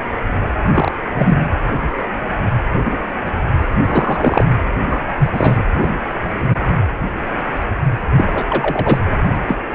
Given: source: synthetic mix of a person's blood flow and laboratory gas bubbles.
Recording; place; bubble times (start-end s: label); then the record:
Doppler ultrasound of blood flow; precordium
0.74-0.92 s: bubbles
1.15-1.37 s: bubbles
3.85-4.45 s: bubbles
4.89-5.00 s: bubbles
5.18-5.29 s: bubbles
5.32-5.65 s: bubbles
5.81-5.90 s: bubbles
8.16-8.98 s: bubbles
9.47-9.55 s: bubbles
From the record:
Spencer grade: 3 (all of the cardiac periods contain showers or single bubble signals, but not dominating or overriding the cardiac motion signals); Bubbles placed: anywhere in the cardiac cycle